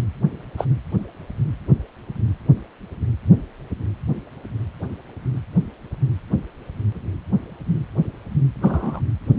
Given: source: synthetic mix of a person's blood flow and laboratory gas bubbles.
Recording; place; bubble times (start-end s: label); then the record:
Doppler ultrasound of blood flow; precordium
0.57-0.65 s: bubbles
8.62-9.01 s: bubbles
From the record:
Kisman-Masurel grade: 122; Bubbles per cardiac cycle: 1 to 2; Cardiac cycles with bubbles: 10 to 50%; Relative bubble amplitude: moderate (0.250 to 0.450); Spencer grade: 2 (many but less than half of the cardiac periods contain bubble signals, singularly or in groups); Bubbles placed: anywhere in the cardiac cycle